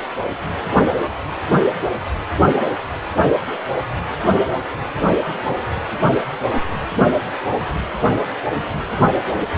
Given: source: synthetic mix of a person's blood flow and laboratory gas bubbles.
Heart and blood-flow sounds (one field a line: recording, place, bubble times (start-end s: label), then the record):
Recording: Doppler ultrasound of blood flow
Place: precordium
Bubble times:
no bubbles
From the record:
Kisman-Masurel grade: 000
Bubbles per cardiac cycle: 0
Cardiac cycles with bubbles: 0%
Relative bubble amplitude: no bubbles discernible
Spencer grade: 0 (complete lack of bubble signals)